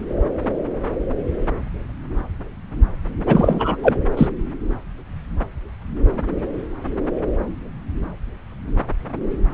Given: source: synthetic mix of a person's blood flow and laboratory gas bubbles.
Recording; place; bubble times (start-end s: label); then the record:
Doppler ultrasound of blood flow; subclavian vein
3.26-3.77 s: bubbles
3.83-3.96 s: bubbles
4.17-4.27 s: bubbles
From the record:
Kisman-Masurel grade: 213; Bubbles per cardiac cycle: several, 3 to 8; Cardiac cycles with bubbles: 1 to 10%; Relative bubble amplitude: loud (0.450 to 0.775); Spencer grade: 1 (occasional bubble signal discernible with the cardiac motion signal, with majority of cardiac periods free of bubbles); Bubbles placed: anywhere in the cardiac cycle